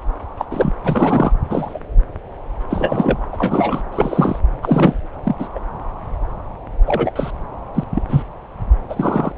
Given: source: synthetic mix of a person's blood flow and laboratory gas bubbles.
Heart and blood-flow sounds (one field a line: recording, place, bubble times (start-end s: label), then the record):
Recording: Doppler ultrasound of blood flow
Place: subclavian vein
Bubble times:
0.39-0.45 s: bubbles
0.51-0.71 s: bubbles
0.83-1.32 s: bubbles
1.49-1.79 s: bubbles
2.70-3.29 s: bubbles
3.32-3.83 s: bubbles
3.91-4.39 s: bubbles
4.62-4.99 s: bubbles
5.23-5.35 s: bubbles
5.39-5.48 s: bubbles
5.54-5.59 s: bubbles
6.86-7.12 s: bubbles
7.15-7.30 s: bubbles
7.75-7.83 s: bubbles
7.91-8.03 s: bubbles
8.08-8.23 s: bubbles
8.89-9.32 s: bubbles
From the record:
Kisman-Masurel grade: 233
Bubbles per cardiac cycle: several, 3 to 8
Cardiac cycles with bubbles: 50 to 99%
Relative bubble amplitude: loud (0.450 to 0.775)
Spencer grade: 3 (all of the cardiac periods contain showers or single bubble signals, but not dominating or overriding the cardiac motion signals)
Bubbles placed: anywhere in the cardiac cycle